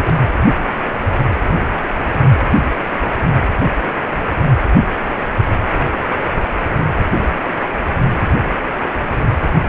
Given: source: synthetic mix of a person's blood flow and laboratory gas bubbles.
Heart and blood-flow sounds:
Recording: Doppler ultrasound of blood flow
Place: precordium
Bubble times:
0.00-0.24 s: bubbles
From the record:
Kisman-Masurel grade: 121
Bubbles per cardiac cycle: 1 to 2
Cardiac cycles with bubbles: 10 to 50%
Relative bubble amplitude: barely perceptible (0.100 to 0.250)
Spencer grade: 2 (many but less than half of the cardiac periods contain bubble signals, singularly or in groups)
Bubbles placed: anywhere in the cardiac cycle

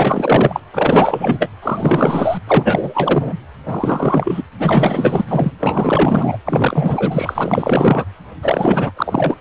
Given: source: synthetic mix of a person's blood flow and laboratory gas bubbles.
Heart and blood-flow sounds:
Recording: Doppler ultrasound of blood flow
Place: precordium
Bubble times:
0.00-0.60 s: bubbles
0.73-1.50 s: bubbles
1.62-2.38 s: bubbles
2.46-3.33 s: bubbles
3.65-4.41 s: bubbles
4.59-5.25 s: bubbles
5.28-5.52 s: bubbles
5.60-6.38 s: bubbles
6.45-8.04 s: bubbles
8.41-8.91 s: bubbles
8.96-9.36 s: bubbles
From the record:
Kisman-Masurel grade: 444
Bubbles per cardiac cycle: continuous sound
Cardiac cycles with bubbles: 100%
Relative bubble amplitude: maximal (0.775 to 0.999)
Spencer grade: 4 (maximum detectable bubble signal sounding continuously throughout systole and diastole of every cardiac period, and overriding the amplitude of the normal cardiac signals)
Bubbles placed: anywhere in the cardiac cycle

